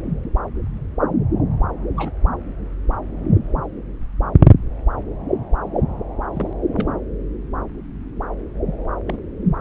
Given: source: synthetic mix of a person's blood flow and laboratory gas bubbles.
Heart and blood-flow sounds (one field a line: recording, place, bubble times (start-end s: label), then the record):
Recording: Doppler ultrasound of blood flow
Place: subclavian vein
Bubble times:
1.97-2.12 s: bubbles
6.34-6.53 s: bubbles
6.73-6.88 s: bubbles
9.07-9.19 s: bubbles
From the record:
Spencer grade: 2 (many but less than half of the cardiac periods contain bubble signals, singularly or in groups)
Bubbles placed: anywhere in the cardiac cycle